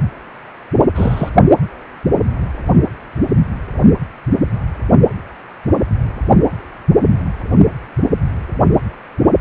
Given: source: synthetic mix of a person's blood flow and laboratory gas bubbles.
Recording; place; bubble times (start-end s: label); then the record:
Doppler ultrasound of blood flow; precordium
0.95-1.30 s: bubbles
From the record:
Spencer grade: 1 (occasional bubble signal discernible with the cardiac motion signal, with majority of cardiac periods free of bubbles); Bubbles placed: only in the low amplitude regions of the cardiac cycle